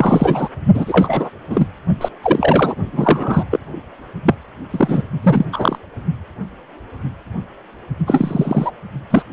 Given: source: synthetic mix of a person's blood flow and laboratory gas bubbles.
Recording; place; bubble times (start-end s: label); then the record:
Doppler ultrasound of blood flow; precordium
0.00-0.49 s: bubbles
0.74-1.30 s: bubbles
1.50-1.67 s: bubbles
2.01-2.08 s: bubbles
2.22-2.75 s: bubbles
2.93-3.45 s: bubbles
3.50-3.59 s: bubbles
4.26-4.35 s: bubbles
4.70-5.02 s: bubbles
5.22-5.45 s: bubbles
5.52-5.78 s: bubbles
8.07-8.71 s: bubbles
9.10-9.23 s: bubbles
From the record:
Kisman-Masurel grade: 233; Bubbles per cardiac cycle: several, 3 to 8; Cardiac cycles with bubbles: 50 to 99%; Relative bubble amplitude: loud (0.450 to 0.775); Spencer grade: 3 (all of the cardiac periods contain showers or single bubble signals, but not dominating or overriding the cardiac motion signals); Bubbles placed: only in the low amplitude regions of the cardiac cycle